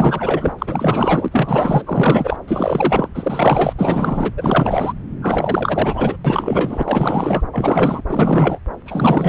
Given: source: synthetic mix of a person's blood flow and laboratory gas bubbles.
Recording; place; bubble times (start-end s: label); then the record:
Doppler ultrasound of blood flow; subclavian vein
0.00-0.53 s: bubbles
0.58-1.28 s: bubbles
1.31-1.82 s: bubbles
1.86-2.38 s: bubbles
2.47-3.08 s: bubbles
3.14-3.73 s: bubbles
3.77-4.31 s: bubbles
4.37-4.93 s: bubbles
5.21-6.17 s: bubbles
6.25-7.44 s: bubbles
7.52-8.02 s: bubbles
8.08-8.58 s: bubbles
8.86-9.28 s: bubbles
From the record:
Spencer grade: 4 (maximum detectable bubble signal sounding continuously throughout systole and diastole of every cardiac period, and overriding the amplitude of the normal cardiac signals); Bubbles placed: anywhere in the cardiac cycle